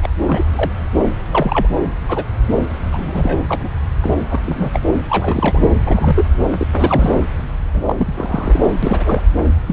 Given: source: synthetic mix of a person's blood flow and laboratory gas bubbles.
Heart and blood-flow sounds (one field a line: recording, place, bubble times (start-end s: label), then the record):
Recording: Doppler ultrasound of blood flow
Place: subclavian vein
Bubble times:
0.02-0.08 s: bubbles
0.28-0.45 s: bubbles
0.55-0.71 s: bubbles
1.31-1.68 s: bubbles
1.75-1.81 s: bubbles
2.08-2.24 s: bubbles
2.58-2.64 s: bubbles
2.92-3.44 s: bubbles
3.48-3.69 s: bubbles
4.01-4.16 s: bubbles
4.30-4.40 s: bubbles
4.46-4.82 s: bubbles
5.09-5.72 s: bubbles
5.83-6.30 s: bubbles
6.58-6.67 s: bubbles
6.75-7.13 s: bubbles
7.74-7.83 s: bubbles
7.85-7.95 s: bubbles
7.98-8.61 s: bubbles
8.82-9.21 s: bubbles
9.38-9.47 s: bubbles
9.66-9.73 s: bubbles
From the record:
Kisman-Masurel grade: 242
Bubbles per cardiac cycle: several, 3 to 8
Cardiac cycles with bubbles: 100%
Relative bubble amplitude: moderate (0.250 to 0.450)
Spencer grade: 3 (all of the cardiac periods contain showers or single bubble signals, but not dominating or overriding the cardiac motion signals)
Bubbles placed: anywhere in the cardiac cycle